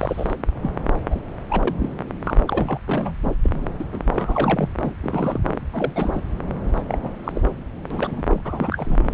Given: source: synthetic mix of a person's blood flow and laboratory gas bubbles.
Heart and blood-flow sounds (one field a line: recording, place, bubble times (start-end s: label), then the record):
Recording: Doppler ultrasound of blood flow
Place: subclavian vein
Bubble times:
0.00-0.35 s: bubbles
0.62-0.72 s: bubbles
1.10-1.21 s: bubbles
1.50-1.75 s: bubbles
1.79-1.90 s: bubbles
2.23-2.43 s: bubbles
2.46-2.79 s: bubbles
2.86-3.16 s: bubbles
3.25-3.35 s: bubbles
3.45-3.50 s: bubbles
3.78-3.85 s: bubbles
3.93-3.99 s: bubbles
4.10-4.69 s: bubbles
4.81-4.94 s: bubbles
5.01-5.59 s: bubbles
5.72-6.23 s: bubbles
6.75-6.83 s: bubbles
6.88-6.98 s: bubbles
7.03-7.10 s: bubbles
7.24-7.32 s: bubbles
7.34-7.42 s: bubbles
7.90-8.22 s: bubbles
8.27-8.41 s: bubbles
8.45-9.13 s: bubbles
From the record:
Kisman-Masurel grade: 242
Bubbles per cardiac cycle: several, 3 to 8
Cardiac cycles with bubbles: 100%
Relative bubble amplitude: moderate (0.250 to 0.450)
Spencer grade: 3 (all of the cardiac periods contain showers or single bubble signals, but not dominating or overriding the cardiac motion signals)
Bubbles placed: anywhere in the cardiac cycle